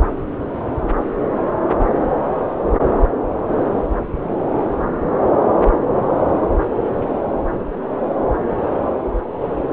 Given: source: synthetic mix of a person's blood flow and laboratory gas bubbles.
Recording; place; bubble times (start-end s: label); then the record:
Doppler ultrasound of blood flow; subclavian vein
no bubbles
From the record:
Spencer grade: 0 (complete lack of bubble signals)